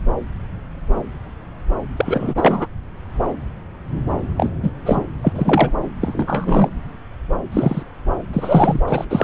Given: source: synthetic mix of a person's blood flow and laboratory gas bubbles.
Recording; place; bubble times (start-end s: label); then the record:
Doppler ultrasound of blood flow; subclavian vein
1.96-2.67 s: bubbles
4.36-4.50 s: bubbles
4.62-4.71 s: bubbles
4.85-5.01 s: bubbles
5.22-5.71 s: bubbles
6.00-6.69 s: bubbles
7.51-7.83 s: bubbles
8.33-8.80 s: bubbles
8.88-9.05 s: bubbles
9.10-9.24 s: bubbles
From the record:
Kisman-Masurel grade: 233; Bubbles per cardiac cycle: several, 3 to 8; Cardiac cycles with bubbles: 50 to 99%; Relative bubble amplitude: loud (0.450 to 0.775); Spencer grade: 3 (all of the cardiac periods contain showers or single bubble signals, but not dominating or overriding the cardiac motion signals); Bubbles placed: anywhere in the cardiac cycle